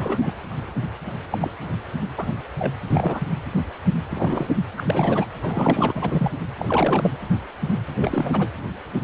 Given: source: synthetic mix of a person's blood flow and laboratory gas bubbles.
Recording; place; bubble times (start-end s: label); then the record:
Doppler ultrasound of blood flow; precordium
0.00-0.19 s: bubbles
0.21-0.33 s: bubbles
1.30-1.49 s: bubbles
2.17-2.34 s: bubbles
2.58-2.74 s: bubbles
2.90-3.20 s: bubbles
4.10-4.47 s: bubbles
4.77-5.25 s: bubbles
5.42-5.92 s: bubbles
5.94-6.31 s: bubbles
6.59-7.10 s: bubbles
7.96-8.49 s: bubbles
From the record:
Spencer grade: 3 (all of the cardiac periods contain showers or single bubble signals, but not dominating or overriding the cardiac motion signals); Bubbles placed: anywhere in the cardiac cycle